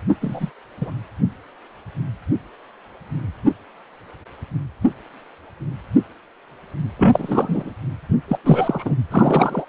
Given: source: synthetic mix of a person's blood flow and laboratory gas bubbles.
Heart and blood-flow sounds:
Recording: Doppler ultrasound of blood flow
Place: precordium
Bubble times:
0.08-0.14 s: bubbles
0.21-0.50 s: bubbles
0.81-0.91 s: bubbles
6.97-7.71 s: bubbles
8.28-8.38 s: bubbles
8.44-8.95 s: bubbles
9.10-9.65 s: bubbles
From the record:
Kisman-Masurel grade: 223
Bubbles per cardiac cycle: several, 3 to 8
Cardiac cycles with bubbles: 10 to 50%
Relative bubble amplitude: loud (0.450 to 0.775)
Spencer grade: 2 (many but less than half of the cardiac periods contain bubble signals, singularly or in groups)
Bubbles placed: anywhere in the cardiac cycle

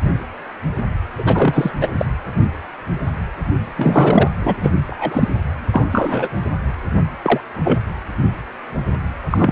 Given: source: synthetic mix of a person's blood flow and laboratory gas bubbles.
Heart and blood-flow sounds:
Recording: Doppler ultrasound of blood flow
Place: precordium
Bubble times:
1.18-1.71 s: bubbles
1.81-1.88 s: bubbles
1.98-2.06 s: bubbles
3.77-4.27 s: bubbles
4.39-4.75 s: bubbles
4.87-5.28 s: bubbles
5.71-5.85 s: bubbles
5.92-6.29 s: bubbles
7.22-7.40 s: bubbles
7.64-7.80 s: bubbles
9.30-9.51 s: bubbles
From the record:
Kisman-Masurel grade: 233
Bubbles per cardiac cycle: several, 3 to 8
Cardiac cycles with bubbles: 50 to 99%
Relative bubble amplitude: loud (0.450 to 0.775)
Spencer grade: 3 (all of the cardiac periods contain showers or single bubble signals, but not dominating or overriding the cardiac motion signals)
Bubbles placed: anywhere in the cardiac cycle

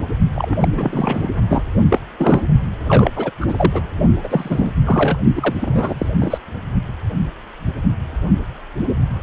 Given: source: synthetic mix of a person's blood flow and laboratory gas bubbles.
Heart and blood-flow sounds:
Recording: Doppler ultrasound of blood flow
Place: precordium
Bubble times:
0.35-0.56 s: bubbles
0.59-0.68 s: bubbles
0.75-1.29 s: bubbles
1.49-1.63 s: bubbles
1.89-1.99 s: bubbles
2.18-2.41 s: bubbles
2.67-3.11 s: bubbles
3.16-3.30 s: bubbles
3.41-3.81 s: bubbles
4.23-4.73 s: bubbles
4.85-5.18 s: bubbles
5.36-6.07 s: bubbles
6.20-6.38 s: bubbles
From the record:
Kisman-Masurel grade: 333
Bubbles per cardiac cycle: rolling drumbeat, 9 or more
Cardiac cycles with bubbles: 50 to 99%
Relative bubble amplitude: loud (0.450 to 0.775)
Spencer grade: 3 (all of the cardiac periods contain showers or single bubble signals, but not dominating or overriding the cardiac motion signals)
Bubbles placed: only in the low amplitude regions of the cardiac cycle

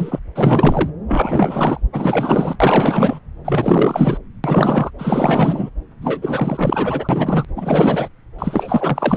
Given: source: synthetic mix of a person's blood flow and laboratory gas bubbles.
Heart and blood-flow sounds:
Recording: Doppler ultrasound of blood flow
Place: subclavian vein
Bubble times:
0.00-0.19 s: bubbles
0.35-0.90 s: bubbles
1.07-1.80 s: bubbles
1.93-2.56 s: bubbles
2.60-3.19 s: bubbles
3.45-4.17 s: bubbles
4.44-4.91 s: bubbles
4.98-5.70 s: bubbles
6.01-7.45 s: bubbles
7.56-8.09 s: bubbles
8.38-9.17 s: bubbles
From the record:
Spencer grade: 4 (maximum detectable bubble signal sounding continuously throughout systole and diastole of every cardiac period, and overriding the amplitude of the normal cardiac signals)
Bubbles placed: anywhere in the cardiac cycle

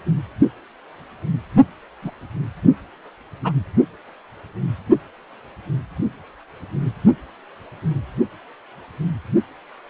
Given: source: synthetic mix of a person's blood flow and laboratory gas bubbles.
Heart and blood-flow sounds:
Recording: Doppler ultrasound of blood flow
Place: precordium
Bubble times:
2.02-2.11 s: bubbles
3.44-3.53 s: bubbles
From the record:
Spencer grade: 1 (occasional bubble signal discernible with the cardiac motion signal, with majority of cardiac periods free of bubbles)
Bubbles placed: only in the low amplitude regions of the cardiac cycle

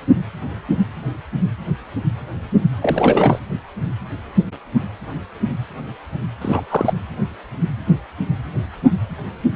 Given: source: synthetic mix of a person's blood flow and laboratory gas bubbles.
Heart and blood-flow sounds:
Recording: Doppler ultrasound of blood flow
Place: precordium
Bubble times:
2.81-3.39 s: bubbles
6.41-6.63 s: bubbles
6.70-6.94 s: bubbles
From the record:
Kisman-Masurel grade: 222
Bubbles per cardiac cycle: several, 3 to 8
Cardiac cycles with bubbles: 10 to 50%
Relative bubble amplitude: moderate (0.250 to 0.450)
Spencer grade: 2 (many but less than half of the cardiac periods contain bubble signals, singularly or in groups)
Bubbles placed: anywhere in the cardiac cycle

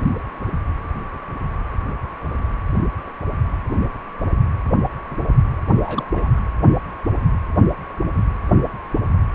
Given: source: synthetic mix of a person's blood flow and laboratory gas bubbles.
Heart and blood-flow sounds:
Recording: Doppler ultrasound of blood flow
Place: precordium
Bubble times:
5.83-6.05 s: bubbles
6.16-6.40 s: bubbles
From the record:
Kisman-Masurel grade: 211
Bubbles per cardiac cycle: several, 3 to 8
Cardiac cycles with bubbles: 1 to 10%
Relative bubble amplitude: barely perceptible (0.100 to 0.250)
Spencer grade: 1 (occasional bubble signal discernible with the cardiac motion signal, with majority of cardiac periods free of bubbles)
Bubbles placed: anywhere in the cardiac cycle

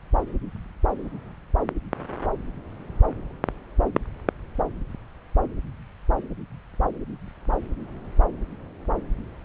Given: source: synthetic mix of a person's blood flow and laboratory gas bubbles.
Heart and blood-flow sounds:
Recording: Doppler ultrasound of blood flow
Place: subclavian vein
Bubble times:
no bubbles
From the record:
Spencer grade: 0 (complete lack of bubble signals)

